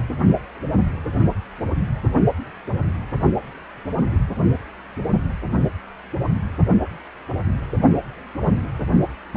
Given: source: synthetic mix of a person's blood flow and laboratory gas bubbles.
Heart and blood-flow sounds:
Doppler ultrasound of blood flow; precordium
9.33-9.37 s: bubbles
From the record:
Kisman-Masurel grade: 121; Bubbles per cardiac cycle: 1 to 2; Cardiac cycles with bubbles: 10 to 50%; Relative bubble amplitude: barely perceptible (0.100 to 0.250); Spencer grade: 2 (many but less than half of the cardiac periods contain bubble signals, singularly or in groups); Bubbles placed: only in the low amplitude regions of the cardiac cycle

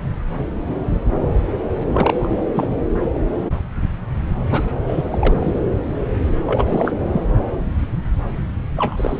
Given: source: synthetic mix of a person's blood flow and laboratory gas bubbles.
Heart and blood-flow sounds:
Doppler ultrasound of blood flow; subclavian vein
1.87-2.38 s: bubbles
2.54-2.76 s: bubbles
3.13-3.19 s: bubbles
4.50-4.62 s: bubbles
4.87-5.03 s: bubbles
5.11-5.67 s: bubbles
6.46-6.93 s: bubbles
7.12-7.22 s: bubbles
8.77-9.20 s: bubbles
From the record:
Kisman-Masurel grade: 332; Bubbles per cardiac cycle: rolling drumbeat, 9 or more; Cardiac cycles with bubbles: 50 to 99%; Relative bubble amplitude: moderate (0.250 to 0.450); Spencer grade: 3 (all of the cardiac periods contain showers or single bubble signals, but not dominating or overriding the cardiac motion signals); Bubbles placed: anywhere in the cardiac cycle

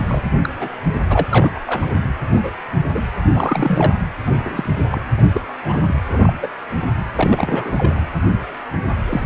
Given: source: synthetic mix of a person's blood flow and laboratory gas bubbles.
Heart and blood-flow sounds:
Doppler ultrasound of blood flow; precordium
0.00-0.02 s: bubbles
0.09-0.23 s: bubbles
0.44-0.49 s: bubbles
0.60-0.68 s: bubbles
1.09-1.27 s: bubbles
1.31-1.52 s: bubbles
1.55-1.60 s: bubbles
1.67-1.88 s: bubbles
2.31-2.51 s: bubbles
2.94-3.03 s: bubbles
3.32-3.93 s: bubbles
4.26-4.35 s: bubbles
4.38-4.72 s: bubbles
4.91-5.01 s: bubbles
5.17-5.22 s: bubbles
5.33-5.41 s: bubbles
5.64-5.81 s: bubbles
5.88-5.93 s: bubbles
6.09-6.33 s: bubbles
6.42-6.47 s: bubbles
7.16-8.08 s: bubbles
9.06-9.26 s: bubbles
From the record:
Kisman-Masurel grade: 232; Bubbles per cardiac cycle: several, 3 to 8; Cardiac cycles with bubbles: 50 to 99%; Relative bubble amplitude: moderate (0.250 to 0.450); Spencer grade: 3 (all of the cardiac periods contain showers or single bubble signals, but not dominating or overriding the cardiac motion signals); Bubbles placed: anywhere in the cardiac cycle

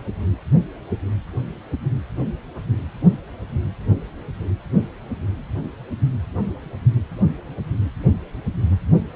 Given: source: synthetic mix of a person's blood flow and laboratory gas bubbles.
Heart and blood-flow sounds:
Doppler ultrasound of blood flow; precordium
no bubbles
From the record:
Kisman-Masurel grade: 000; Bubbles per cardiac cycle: 0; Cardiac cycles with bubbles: 0%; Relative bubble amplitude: no bubbles discernible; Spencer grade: 0 (complete lack of bubble signals)

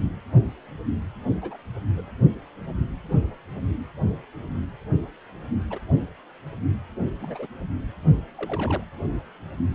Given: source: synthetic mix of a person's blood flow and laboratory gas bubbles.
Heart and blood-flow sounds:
Doppler ultrasound of blood flow; precordium
0.33-0.43 s: bubbles
1.42-1.56 s: bubbles
1.91-2.10 s: bubbles
5.70-5.79 s: bubbles
7.20-7.47 s: bubbles
8.37-8.83 s: bubbles
From the record:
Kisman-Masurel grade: 121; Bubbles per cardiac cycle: 1 to 2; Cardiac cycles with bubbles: 10 to 50%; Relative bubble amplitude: barely perceptible (0.100 to 0.250); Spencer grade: 2 (many but less than half of the cardiac periods contain bubble signals, singularly or in groups); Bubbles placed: only in the low amplitude regions of the cardiac cycle

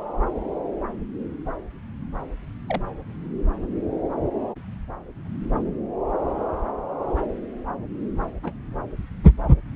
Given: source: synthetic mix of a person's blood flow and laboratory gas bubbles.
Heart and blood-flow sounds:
Doppler ultrasound of blood flow; subclavian vein
2.69-2.81 s: bubbles
8.43-8.53 s: bubbles
From the record:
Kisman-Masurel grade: 121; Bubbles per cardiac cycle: 1 to 2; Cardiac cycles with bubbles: 10 to 50%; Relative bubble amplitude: barely perceptible (0.100 to 0.250); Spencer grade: 2 (many but less than half of the cardiac periods contain bubble signals, singularly or in groups); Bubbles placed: anywhere in the cardiac cycle

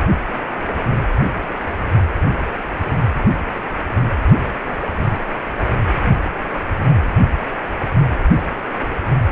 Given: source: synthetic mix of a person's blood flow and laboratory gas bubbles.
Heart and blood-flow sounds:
Doppler ultrasound of blood flow; precordium
no bubbles
From the record:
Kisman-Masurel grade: 000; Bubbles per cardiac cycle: 0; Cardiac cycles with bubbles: 0%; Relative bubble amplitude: no bubbles discernible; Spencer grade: 0 (complete lack of bubble signals)

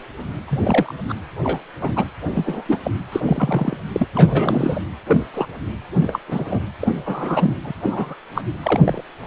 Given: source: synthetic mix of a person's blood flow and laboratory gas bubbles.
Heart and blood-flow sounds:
Doppler ultrasound of blood flow; precordium
0.00-0.03 s: bubbles
0.48-0.94 s: bubbles
1.08-1.13 s: bubbles
1.42-1.60 s: bubbles
1.81-2.04 s: bubbles
2.35-2.79 s: bubbles
2.84-2.91 s: bubbles
3.12-3.20 s: bubbles
3.26-3.77 s: bubbles
3.89-4.06 s: bubbles
4.14-4.82 s: bubbles
5.07-5.23 s: bubbles
5.33-5.47 s: bubbles
6.00-6.20 s: bubbles
6.28-6.60 s: bubbles
6.79-6.93 s: bubbles
7.06-7.55 s: bubbles
7.64-7.73 s: bubbles
7.83-8.15 s: bubbles
8.34-8.42 s: bubbles
8.62-8.81 s: bubbles
8.83-9.04 s: bubbles
9.21-9.27 s: bubbles
From the record:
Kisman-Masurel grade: 242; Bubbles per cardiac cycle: several, 3 to 8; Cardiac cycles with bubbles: 100%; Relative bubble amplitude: moderate (0.250 to 0.450); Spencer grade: 3 (all of the cardiac periods contain showers or single bubble signals, but not dominating or overriding the cardiac motion signals); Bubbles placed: anywhere in the cardiac cycle

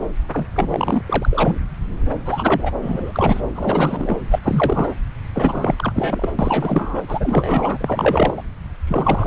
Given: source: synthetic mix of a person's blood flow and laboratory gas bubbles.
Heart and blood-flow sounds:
Doppler ultrasound of blood flow; subclavian vein
0.33-0.47 s: bubbles
0.55-1.03 s: bubbles
1.07-1.61 s: bubbles
2.25-2.71 s: bubbles
2.82-3.41 s: bubbles
3.54-4.16 s: bubbles
4.30-4.39 s: bubbles
4.44-4.95 s: bubbles
5.32-6.29 s: bubbles
6.38-7.01 s: bubbles
7.08-7.77 s: bubbles
7.80-8.42 s: bubbles
8.87-9.27 s: bubbles
From the record:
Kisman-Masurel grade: 333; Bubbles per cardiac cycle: rolling drumbeat, 9 or more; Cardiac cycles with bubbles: 50 to 99%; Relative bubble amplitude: loud (0.450 to 0.775); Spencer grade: 3 (all of the cardiac periods contain showers or single bubble signals, but not dominating or overriding the cardiac motion signals); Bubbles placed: anywhere in the cardiac cycle

